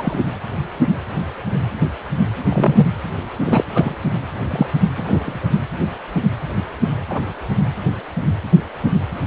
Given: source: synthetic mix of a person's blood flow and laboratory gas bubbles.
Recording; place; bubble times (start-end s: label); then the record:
Doppler ultrasound of blood flow; precordium
0.00-0.18 s: bubbles
2.50-2.86 s: bubbles
3.44-3.65 s: bubbles
3.75-3.95 s: bubbles
4.50-4.67 s: bubbles
4.96-5.51 s: bubbles
7.09-7.21 s: bubbles
From the record:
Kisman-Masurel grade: 123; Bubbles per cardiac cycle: 1 to 2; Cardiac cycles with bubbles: 10 to 50%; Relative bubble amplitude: loud (0.450 to 0.775); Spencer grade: 2 (many but less than half of the cardiac periods contain bubble signals, singularly or in groups); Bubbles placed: anywhere in the cardiac cycle